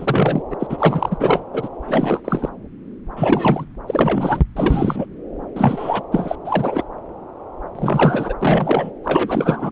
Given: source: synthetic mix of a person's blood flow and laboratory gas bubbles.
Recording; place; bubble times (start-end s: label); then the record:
Doppler ultrasound of blood flow; subclavian vein
0.00-0.43 s: bubbles
0.50-0.56 s: bubbles
0.59-1.17 s: bubbles
1.20-1.45 s: bubbles
1.53-1.69 s: bubbles
1.87-2.21 s: bubbles
2.24-2.49 s: bubbles
3.16-3.65 s: bubbles
3.87-4.41 s: bubbles
4.57-5.06 s: bubbles
5.55-6.03 s: bubbles
6.11-6.36 s: bubbles
6.45-6.83 s: bubbles
7.75-8.33 s: bubbles
8.41-8.90 s: bubbles
9.04-9.71 s: bubbles
From the record:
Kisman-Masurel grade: 333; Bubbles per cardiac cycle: rolling drumbeat, 9 or more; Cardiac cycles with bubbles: 50 to 99%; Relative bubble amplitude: loud (0.450 to 0.775); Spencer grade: 3 (all of the cardiac periods contain showers or single bubble signals, but not dominating or overriding the cardiac motion signals); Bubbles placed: anywhere in the cardiac cycle